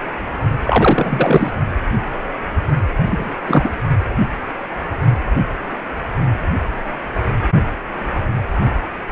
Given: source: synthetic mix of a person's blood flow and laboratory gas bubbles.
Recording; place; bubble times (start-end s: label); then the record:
Doppler ultrasound of blood flow; precordium
0.64-1.51 s: bubbles
3.06-3.30 s: bubbles
3.46-3.72 s: bubbles
From the record:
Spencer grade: 2 (many but less than half of the cardiac periods contain bubble signals, singularly or in groups); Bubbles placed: only in the low amplitude regions of the cardiac cycle